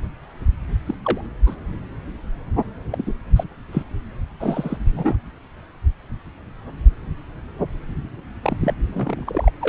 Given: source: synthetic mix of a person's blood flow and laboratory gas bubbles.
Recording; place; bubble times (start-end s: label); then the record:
Doppler ultrasound of blood flow; subclavian vein
0.87-0.95 s: bubbles
1.04-1.21 s: bubbles
1.46-1.55 s: bubbles
2.92-3.13 s: bubbles
3.36-3.44 s: bubbles
3.72-3.83 s: bubbles
4.39-5.16 s: bubbles
8.43-8.57 s: bubbles
8.61-8.73 s: bubbles
8.93-9.52 s: bubbles
9.60-9.69 s: bubbles
From the record:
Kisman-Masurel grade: 222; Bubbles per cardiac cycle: several, 3 to 8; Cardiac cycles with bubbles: 10 to 50%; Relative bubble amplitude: moderate (0.250 to 0.450); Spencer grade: 2 (many but less than half of the cardiac periods contain bubble signals, singularly or in groups); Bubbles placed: anywhere in the cardiac cycle